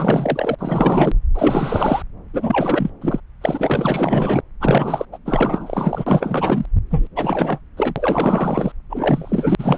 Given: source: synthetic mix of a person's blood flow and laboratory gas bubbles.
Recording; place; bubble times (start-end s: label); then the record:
Doppler ultrasound of blood flow; subclavian vein
0.00-0.55 s: bubbles
0.58-1.16 s: bubbles
1.34-2.02 s: bubbles
2.33-2.90 s: bubbles
3.01-3.20 s: bubbles
3.41-4.41 s: bubbles
4.60-5.05 s: bubbles
5.12-5.18 s: bubbles
5.25-6.67 s: bubbles
6.90-7.08 s: bubbles
7.16-7.60 s: bubbles
7.76-8.72 s: bubbles
8.89-9.55 s: bubbles
9.59-9.77 s: bubbles
From the record:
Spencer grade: 4 (maximum detectable bubble signal sounding continuously throughout systole and diastole of every cardiac period, and overriding the amplitude of the normal cardiac signals); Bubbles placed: anywhere in the cardiac cycle